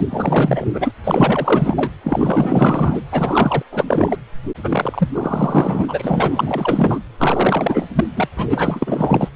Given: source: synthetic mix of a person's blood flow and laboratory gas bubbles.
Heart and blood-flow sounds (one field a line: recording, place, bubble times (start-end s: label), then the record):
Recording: Doppler ultrasound of blood flow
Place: precordium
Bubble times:
0.00-0.06 s: bubbles
0.09-0.92 s: bubbles
1.03-1.90 s: bubbles
2.03-3.02 s: bubbles
3.11-3.62 s: bubbles
3.71-3.84 s: bubbles
3.88-4.17 s: bubbles
4.62-5.08 s: bubbles
5.13-6.99 s: bubbles
7.17-7.88 s: bubbles
7.95-8.05 s: bubbles
8.16-8.29 s: bubbles
8.36-9.29 s: bubbles
From the record:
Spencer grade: 4 (maximum detectable bubble signal sounding continuously throughout systole and diastole of every cardiac period, and overriding the amplitude of the normal cardiac signals)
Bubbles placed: anywhere in the cardiac cycle